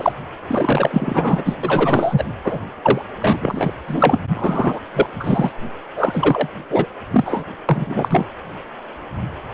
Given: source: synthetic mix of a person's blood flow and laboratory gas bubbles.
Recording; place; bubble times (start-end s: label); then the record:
Doppler ultrasound of blood flow; precordium
0.00-0.12 s: bubbles
0.47-1.57 s: bubbles
1.63-2.25 s: bubbles
2.44-2.60 s: bubbles
2.82-3.02 s: bubbles
3.20-3.72 s: bubbles
3.87-4.17 s: bubbles
4.34-4.79 s: bubbles
4.93-5.06 s: bubbles
5.20-5.51 s: bubbles
5.96-6.48 s: bubbles
6.70-6.86 s: bubbles
7.10-7.43 s: bubbles
7.68-8.26 s: bubbles
From the record:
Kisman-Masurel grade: 333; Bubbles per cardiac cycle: rolling drumbeat, 9 or more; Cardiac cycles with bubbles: 50 to 99%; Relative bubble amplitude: loud (0.450 to 0.775); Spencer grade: 3 (all of the cardiac periods contain showers or single bubble signals, but not dominating or overriding the cardiac motion signals); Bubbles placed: anywhere in the cardiac cycle